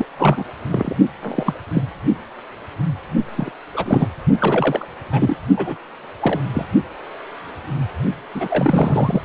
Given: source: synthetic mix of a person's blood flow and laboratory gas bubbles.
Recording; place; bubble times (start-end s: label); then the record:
Doppler ultrasound of blood flow; precordium
0.00-0.05 s: bubbles
0.17-0.45 s: bubbles
0.70-0.96 s: bubbles
1.22-1.54 s: bubbles
1.73-1.82 s: bubbles
3.36-3.52 s: bubbles
3.74-4.08 s: bubbles
4.38-4.86 s: bubbles
5.11-5.36 s: bubbles
5.57-5.76 s: bubbles
6.20-6.40 s: bubbles
6.54-6.66 s: bubbles
8.34-9.22 s: bubbles
From the record:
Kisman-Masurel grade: 232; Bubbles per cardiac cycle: several, 3 to 8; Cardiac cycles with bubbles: 50 to 99%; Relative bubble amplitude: moderate (0.250 to 0.450); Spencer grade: 3 (all of the cardiac periods contain showers or single bubble signals, but not dominating or overriding the cardiac motion signals); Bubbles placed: only in the low amplitude regions of the cardiac cycle